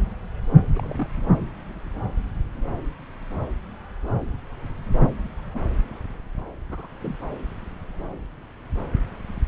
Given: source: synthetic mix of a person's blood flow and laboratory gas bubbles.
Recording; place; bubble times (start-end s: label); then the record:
Doppler ultrasound of blood flow; subclavian vein
0.74-1.07 s: bubbles
5.54-5.59 s: bubbles
6.71-6.88 s: bubbles
7.00-7.15 s: bubbles
From the record:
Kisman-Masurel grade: 121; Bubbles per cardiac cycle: 1 to 2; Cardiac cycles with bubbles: 10 to 50%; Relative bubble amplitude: barely perceptible (0.100 to 0.250); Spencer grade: 2 (many but less than half of the cardiac periods contain bubble signals, singularly or in groups); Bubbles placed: anywhere in the cardiac cycle